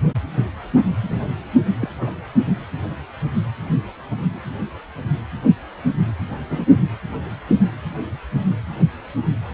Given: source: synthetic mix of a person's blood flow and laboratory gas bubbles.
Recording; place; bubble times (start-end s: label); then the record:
Doppler ultrasound of blood flow; precordium
1.03-1.33 s: bubbles
1.79-1.89 s: bubbles
2.01-2.10 s: bubbles
6.50-6.67 s: bubbles
From the record:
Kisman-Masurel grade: 122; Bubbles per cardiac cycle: 1 to 2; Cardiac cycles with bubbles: 10 to 50%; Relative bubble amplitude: moderate (0.250 to 0.450); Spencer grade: 2 (many but less than half of the cardiac periods contain bubble signals, singularly or in groups); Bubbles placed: anywhere in the cardiac cycle